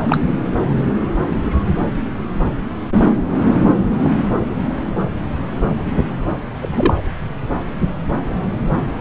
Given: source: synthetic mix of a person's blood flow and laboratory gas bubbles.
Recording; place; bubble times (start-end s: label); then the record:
Doppler ultrasound of blood flow; subclavian vein
0.05-0.17 s: bubbles
6.59-7.07 s: bubbles
From the record:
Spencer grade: 1 (occasional bubble signal discernible with the cardiac motion signal, with majority of cardiac periods free of bubbles); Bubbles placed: anywhere in the cardiac cycle